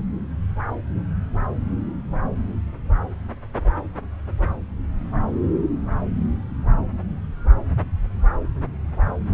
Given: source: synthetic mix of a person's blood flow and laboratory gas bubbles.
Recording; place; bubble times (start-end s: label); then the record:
Doppler ultrasound of blood flow; subclavian vein
no bubbles
From the record:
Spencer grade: 0 (complete lack of bubble signals)